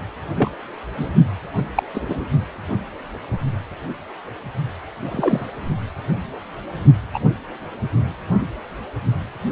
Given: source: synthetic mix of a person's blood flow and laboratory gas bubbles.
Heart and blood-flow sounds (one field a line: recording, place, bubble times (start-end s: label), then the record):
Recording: Doppler ultrasound of blood flow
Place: precordium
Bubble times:
0.35-0.48 s: bubbles
0.97-1.09 s: bubbles
1.75-1.83 s: bubbles
1.94-2.24 s: bubbles
5.04-5.47 s: bubbles
7.13-7.19 s: bubbles
From the record:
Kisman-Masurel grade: 123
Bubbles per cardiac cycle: 1 to 2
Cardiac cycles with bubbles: 10 to 50%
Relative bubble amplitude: loud (0.450 to 0.775)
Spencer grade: 2 (many but less than half of the cardiac periods contain bubble signals, singularly or in groups)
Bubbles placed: only in the low amplitude regions of the cardiac cycle